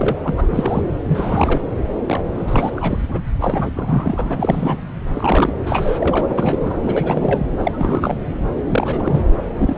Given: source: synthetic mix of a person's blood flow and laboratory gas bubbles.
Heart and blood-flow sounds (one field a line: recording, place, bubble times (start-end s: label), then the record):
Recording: Doppler ultrasound of blood flow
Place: subclavian vein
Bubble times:
0.00-0.16 s: bubbles
0.23-0.46 s: bubbles
0.50-0.82 s: bubbles
1.07-1.61 s: bubbles
2.06-2.24 s: bubbles
2.36-2.71 s: bubbles
2.76-3.02 s: bubbles
3.08-3.20 s: bubbles
3.40-3.72 s: bubbles
3.75-4.79 s: bubbles
5.13-5.52 s: bubbles
5.66-6.77 s: bubbles
6.81-7.46 s: bubbles
7.58-8.18 s: bubbles
8.66-9.22 s: bubbles
9.58-9.76 s: bubbles
From the record:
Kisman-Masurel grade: 343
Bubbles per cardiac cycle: rolling drumbeat, 9 or more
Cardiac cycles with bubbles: 100%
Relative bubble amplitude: loud (0.450 to 0.775)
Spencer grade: 3 (all of the cardiac periods contain showers or single bubble signals, but not dominating or overriding the cardiac motion signals)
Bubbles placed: anywhere in the cardiac cycle